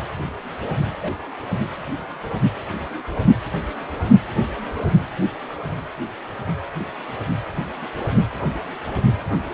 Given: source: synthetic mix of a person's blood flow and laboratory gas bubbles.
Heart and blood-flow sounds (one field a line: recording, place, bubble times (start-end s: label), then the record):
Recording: Doppler ultrasound of blood flow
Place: precordium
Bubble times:
1.01-1.12 s: bubbles
From the record:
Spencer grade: 1 (occasional bubble signal discernible with the cardiac motion signal, with majority of cardiac periods free of bubbles)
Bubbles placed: anywhere in the cardiac cycle